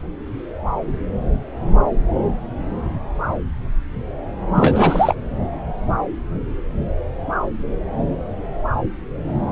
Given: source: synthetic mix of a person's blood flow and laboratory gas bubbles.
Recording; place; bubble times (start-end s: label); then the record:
Doppler ultrasound of blood flow; subclavian vein
4.54-5.15 s: bubbles
From the record:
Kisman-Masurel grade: 213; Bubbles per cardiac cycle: several, 3 to 8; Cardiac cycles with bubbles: 1 to 10%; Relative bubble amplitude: loud (0.450 to 0.775); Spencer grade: 1 (occasional bubble signal discernible with the cardiac motion signal, with majority of cardiac periods free of bubbles); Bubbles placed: anywhere in the cardiac cycle